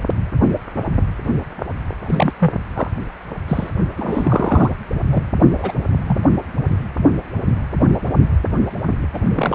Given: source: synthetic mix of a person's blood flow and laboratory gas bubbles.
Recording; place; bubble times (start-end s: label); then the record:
Doppler ultrasound of blood flow; precordium
2.02-2.31 s: bubbles
2.39-2.52 s: bubbles
2.75-2.91 s: bubbles
3.48-3.69 s: bubbles
3.97-4.71 s: bubbles
5.11-5.23 s: bubbles
5.57-5.72 s: bubbles
6.06-6.18 s: bubbles
9.13-9.21 s: bubbles
9.35-9.55 s: bubbles
From the record:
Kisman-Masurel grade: 232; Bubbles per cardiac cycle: several, 3 to 8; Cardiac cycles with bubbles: 50 to 99%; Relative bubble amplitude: moderate (0.250 to 0.450); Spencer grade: 3 (all of the cardiac periods contain showers or single bubble signals, but not dominating or overriding the cardiac motion signals); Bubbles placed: anywhere in the cardiac cycle